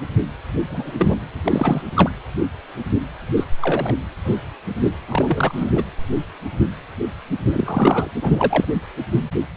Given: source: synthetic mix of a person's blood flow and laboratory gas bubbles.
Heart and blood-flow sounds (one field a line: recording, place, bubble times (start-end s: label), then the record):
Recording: Doppler ultrasound of blood flow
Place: precordium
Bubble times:
0.53-1.28 s: bubbles
1.45-1.82 s: bubbles
1.94-2.10 s: bubbles
3.36-3.45 s: bubbles
3.62-3.94 s: bubbles
4.25-4.35 s: bubbles
5.08-5.71 s: bubbles
5.75-5.83 s: bubbles
7.45-8.11 s: bubbles
8.21-8.65 s: bubbles
From the record:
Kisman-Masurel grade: 232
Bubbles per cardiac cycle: several, 3 to 8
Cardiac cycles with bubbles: 50 to 99%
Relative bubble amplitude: moderate (0.250 to 0.450)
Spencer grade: 3 (all of the cardiac periods contain showers or single bubble signals, but not dominating or overriding the cardiac motion signals)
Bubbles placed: anywhere in the cardiac cycle